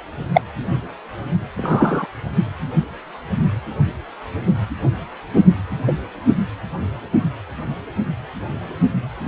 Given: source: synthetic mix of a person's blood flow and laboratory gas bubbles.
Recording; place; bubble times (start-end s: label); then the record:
Doppler ultrasound of blood flow; precordium
0.33-0.41 s: bubbles
1.57-2.07 s: bubbles
5.87-5.93 s: bubbles
9.25-9.28 s: bubbles
From the record:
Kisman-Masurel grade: 123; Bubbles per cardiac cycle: 1 to 2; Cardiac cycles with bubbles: 10 to 50%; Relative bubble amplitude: loud (0.450 to 0.775); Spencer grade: 2 (many but less than half of the cardiac periods contain bubble signals, singularly or in groups); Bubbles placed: anywhere in the cardiac cycle